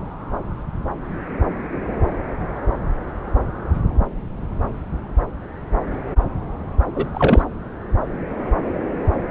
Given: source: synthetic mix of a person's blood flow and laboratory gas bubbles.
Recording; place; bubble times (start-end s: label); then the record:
Doppler ultrasound of blood flow; subclavian vein
6.95-7.06 s: bubbles
7.13-7.42 s: bubbles
From the record:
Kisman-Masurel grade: 212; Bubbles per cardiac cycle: several, 3 to 8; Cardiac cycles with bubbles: 1 to 10%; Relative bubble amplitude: moderate (0.250 to 0.450); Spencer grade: 1 (occasional bubble signal discernible with the cardiac motion signal, with majority of cardiac periods free of bubbles); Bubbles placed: anywhere in the cardiac cycle